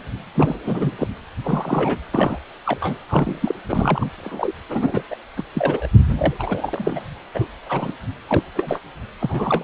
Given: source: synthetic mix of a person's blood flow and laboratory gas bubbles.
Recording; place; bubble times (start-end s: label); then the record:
Doppler ultrasound of blood flow; precordium
0.34-0.91 s: bubbles
0.98-1.07 s: bubbles
1.43-1.99 s: bubbles
2.14-2.39 s: bubbles
2.66-2.98 s: bubbles
3.08-3.55 s: bubbles
3.69-4.10 s: bubbles
4.24-4.52 s: bubbles
4.69-5.03 s: bubbles
5.10-5.17 s: bubbles
5.36-5.43 s: bubbles
5.54-5.87 s: bubbles
6.17-6.34 s: bubbles
6.39-7.06 s: bubbles
7.34-7.47 s: bubbles
7.66-7.92 s: bubbles
8.27-8.43 s: bubbles
8.57-8.80 s: bubbles
9.21-9.64 s: bubbles
From the record:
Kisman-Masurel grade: 242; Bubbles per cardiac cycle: several, 3 to 8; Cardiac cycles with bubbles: 100%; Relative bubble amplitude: moderate (0.250 to 0.450); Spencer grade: 3 (all of the cardiac periods contain showers or single bubble signals, but not dominating or overriding the cardiac motion signals); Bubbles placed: anywhere in the cardiac cycle